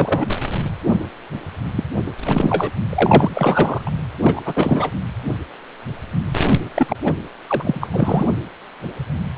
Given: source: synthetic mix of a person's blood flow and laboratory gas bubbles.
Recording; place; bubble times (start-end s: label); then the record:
Doppler ultrasound of blood flow; precordium
0.00-0.28 s: bubbles
1.72-1.84 s: bubbles
2.06-2.12 s: bubbles
2.25-2.71 s: bubbles
2.90-3.81 s: bubbles
3.85-3.90 s: bubbles
4.21-4.92 s: bubbles
6.75-6.96 s: bubbles
7.04-7.12 s: bubbles
7.48-7.87 s: bubbles
7.92-8.26 s: bubbles
9.35-9.38 s: bubbles
From the record:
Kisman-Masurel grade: 333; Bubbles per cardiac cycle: rolling drumbeat, 9 or more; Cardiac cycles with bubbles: 50 to 99%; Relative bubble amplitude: loud (0.450 to 0.775); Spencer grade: 3 (all of the cardiac periods contain showers or single bubble signals, but not dominating or overriding the cardiac motion signals); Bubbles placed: anywhere in the cardiac cycle